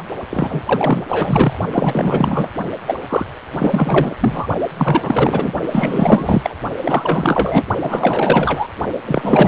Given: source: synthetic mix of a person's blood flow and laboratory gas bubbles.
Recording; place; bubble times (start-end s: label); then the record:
Doppler ultrasound of blood flow; precordium
0.00-0.02 s: bubbles
0.30-0.62 s: bubbles
0.66-1.04 s: bubbles
1.09-1.59 s: bubbles
1.72-2.50 s: bubbles
2.87-2.95 s: bubbles
3.09-3.25 s: bubbles
3.52-4.15 s: bubbles
4.20-4.46 s: bubbles
4.77-5.53 s: bubbles
5.71-6.55 s: bubbles
6.82-7.63 s: bubbles
7.82-8.68 s: bubbles
9.06-9.48 s: bubbles
From the record:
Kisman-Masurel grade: 444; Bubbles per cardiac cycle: continuous sound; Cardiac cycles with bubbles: 100%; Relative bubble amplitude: maximal (0.775 to 0.999); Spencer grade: 4 (maximum detectable bubble signal sounding continuously throughout systole and diastole of every cardiac period, and overriding the amplitude of the normal cardiac signals); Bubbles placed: only in the low amplitude regions of the cardiac cycle